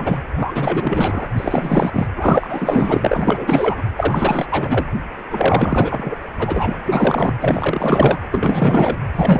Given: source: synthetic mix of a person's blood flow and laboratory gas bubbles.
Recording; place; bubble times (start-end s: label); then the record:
Doppler ultrasound of blood flow; precordium
0.00-0.30 s: bubbles
0.37-1.28 s: bubbles
1.36-2.06 s: bubbles
2.16-3.82 s: bubbles
3.97-4.46 s: bubbles
4.50-4.87 s: bubbles
5.30-6.17 s: bubbles
6.38-6.77 s: bubbles
6.88-7.33 s: bubbles
7.41-8.19 s: bubbles
8.32-8.99 s: bubbles
9.15-9.40 s: bubbles
From the record:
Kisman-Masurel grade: 444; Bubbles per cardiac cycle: continuous sound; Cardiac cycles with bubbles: 100%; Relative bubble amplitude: maximal (0.775 to 0.999); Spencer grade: 4 (maximum detectable bubble signal sounding continuously throughout systole and diastole of every cardiac period, and overriding the amplitude of the normal cardiac signals); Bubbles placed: anywhere in the cardiac cycle